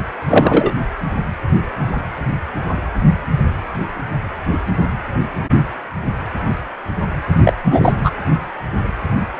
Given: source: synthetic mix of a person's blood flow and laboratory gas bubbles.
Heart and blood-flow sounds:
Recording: Doppler ultrasound of blood flow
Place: precordium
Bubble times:
0.27-0.72 s: bubbles
7.43-7.53 s: bubbles
7.65-8.12 s: bubbles
From the record:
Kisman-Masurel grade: 223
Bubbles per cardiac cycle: several, 3 to 8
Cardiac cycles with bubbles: 10 to 50%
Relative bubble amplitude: loud (0.450 to 0.775)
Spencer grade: 2 (many but less than half of the cardiac periods contain bubble signals, singularly or in groups)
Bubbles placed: anywhere in the cardiac cycle

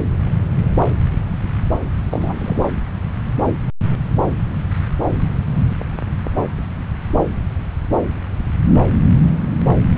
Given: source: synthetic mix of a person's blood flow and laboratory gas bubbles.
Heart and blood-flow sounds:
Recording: Doppler ultrasound of blood flow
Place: subclavian vein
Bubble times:
2.10-2.63 s: bubbles
From the record:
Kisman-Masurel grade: 212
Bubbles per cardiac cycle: several, 3 to 8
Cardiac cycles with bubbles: 1 to 10%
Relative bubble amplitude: moderate (0.250 to 0.450)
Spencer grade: 1 (occasional bubble signal discernible with the cardiac motion signal, with majority of cardiac periods free of bubbles)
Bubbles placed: anywhere in the cardiac cycle

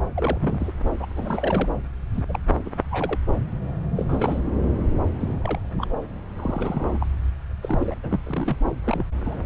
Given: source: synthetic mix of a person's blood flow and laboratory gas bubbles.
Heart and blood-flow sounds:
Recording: Doppler ultrasound of blood flow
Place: subclavian vein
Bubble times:
0.15-0.72 s: bubbles
1.00-1.06 s: bubbles
1.16-1.70 s: bubbles
2.13-2.22 s: bubbles
2.29-2.40 s: bubbles
2.66-2.70 s: bubbles
2.91-3.18 s: bubbles
3.96-4.41 s: bubbles
5.20-5.35 s: bubbles
5.42-5.60 s: bubbles
5.78-6.04 s: bubbles
6.37-7.07 s: bubbles
7.62-7.95 s: bubbles
8.03-8.20 s: bubbles
8.23-8.57 s: bubbles
8.83-9.06 s: bubbles
9.25-9.42 s: bubbles
From the record:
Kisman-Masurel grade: 232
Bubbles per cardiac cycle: several, 3 to 8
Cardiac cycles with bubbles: 50 to 99%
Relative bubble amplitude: moderate (0.250 to 0.450)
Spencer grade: 3 (all of the cardiac periods contain showers or single bubble signals, but not dominating or overriding the cardiac motion signals)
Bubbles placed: anywhere in the cardiac cycle

